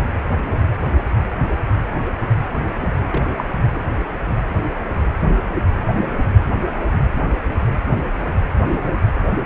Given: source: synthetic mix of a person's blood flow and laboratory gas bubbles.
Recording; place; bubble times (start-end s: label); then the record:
Doppler ultrasound of blood flow; precordium
2.81-2.96 s: bubbles
3.07-3.23 s: bubbles
3.37-3.45 s: bubbles
3.71-3.82 s: bubbles
From the record:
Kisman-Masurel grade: 212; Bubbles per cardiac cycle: several, 3 to 8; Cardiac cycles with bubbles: 1 to 10%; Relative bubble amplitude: moderate (0.250 to 0.450); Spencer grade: 1 (occasional bubble signal discernible with the cardiac motion signal, with majority of cardiac periods free of bubbles); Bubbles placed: anywhere in the cardiac cycle